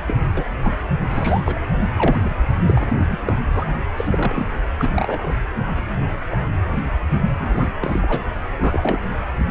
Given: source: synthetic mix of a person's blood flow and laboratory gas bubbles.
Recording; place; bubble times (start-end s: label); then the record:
Doppler ultrasound of blood flow; precordium
0.07-0.17 s: bubbles
0.37-0.44 s: bubbles
0.65-0.78 s: bubbles
1.02-1.41 s: bubbles
1.45-1.59 s: bubbles
1.94-2.19 s: bubbles
2.24-2.40 s: bubbles
2.67-2.86 s: bubbles
2.90-3.06 s: bubbles
3.10-3.18 s: bubbles
3.25-3.35 s: bubbles
3.53-3.65 s: bubbles
3.97-4.51 s: bubbles
4.79-5.34 s: bubbles
6.00-6.05 s: bubbles
6.31-6.36 s: bubbles
6.71-6.77 s: bubbles
7.38-7.71 s: bubbles
7.81-8.21 s: bubbles
8.57-8.99 s: bubbles
From the record:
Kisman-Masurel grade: 242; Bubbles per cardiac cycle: several, 3 to 8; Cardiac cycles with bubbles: 100%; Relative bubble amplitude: moderate (0.250 to 0.450); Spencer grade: 3 (all of the cardiac periods contain showers or single bubble signals, but not dominating or overriding the cardiac motion signals); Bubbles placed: anywhere in the cardiac cycle